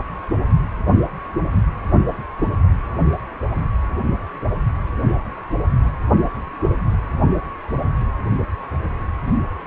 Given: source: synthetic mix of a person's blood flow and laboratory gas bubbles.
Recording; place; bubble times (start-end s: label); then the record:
Doppler ultrasound of blood flow; precordium
no bubbles
From the record:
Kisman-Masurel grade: 000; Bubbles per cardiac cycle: 0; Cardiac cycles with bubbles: 0%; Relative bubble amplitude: no bubbles discernible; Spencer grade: 0 (complete lack of bubble signals)